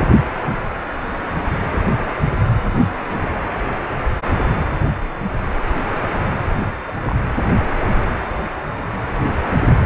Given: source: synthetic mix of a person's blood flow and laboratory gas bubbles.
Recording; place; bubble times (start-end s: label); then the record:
Doppler ultrasound of blood flow; precordium
6.55-6.68 s: bubbles
6.86-6.91 s: bubbles
6.96-7.00 s: bubbles
7.05-7.16 s: bubbles
From the record:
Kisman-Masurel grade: 211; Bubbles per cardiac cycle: several, 3 to 8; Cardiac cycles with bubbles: 1 to 10%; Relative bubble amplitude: barely perceptible (0.100 to 0.250); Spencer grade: 1 (occasional bubble signal discernible with the cardiac motion signal, with majority of cardiac periods free of bubbles); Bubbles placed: anywhere in the cardiac cycle